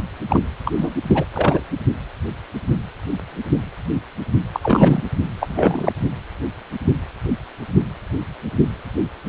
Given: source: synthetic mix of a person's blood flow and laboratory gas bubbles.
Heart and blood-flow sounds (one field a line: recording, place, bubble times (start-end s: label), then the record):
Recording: Doppler ultrasound of blood flow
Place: precordium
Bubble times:
0.29-0.41 s: bubbles
0.65-0.73 s: bubbles
0.77-0.95 s: bubbles
1.09-1.25 s: bubbles
1.33-1.62 s: bubbles
4.53-4.60 s: bubbles
4.63-5.03 s: bubbles
5.40-5.93 s: bubbles
From the record:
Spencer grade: 2 (many but less than half of the cardiac periods contain bubble signals, singularly or in groups)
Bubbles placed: only in the low amplitude regions of the cardiac cycle